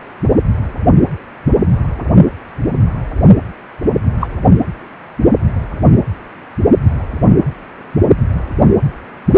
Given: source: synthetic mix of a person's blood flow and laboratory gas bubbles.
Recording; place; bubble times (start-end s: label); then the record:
Doppler ultrasound of blood flow; precordium
4.20-4.27 s: bubbles
From the record:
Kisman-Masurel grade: 113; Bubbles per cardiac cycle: 1 to 2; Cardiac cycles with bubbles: 1 to 10%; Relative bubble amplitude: loud (0.450 to 0.775); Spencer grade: 1 (occasional bubble signal discernible with the cardiac motion signal, with majority of cardiac periods free of bubbles); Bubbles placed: anywhere in the cardiac cycle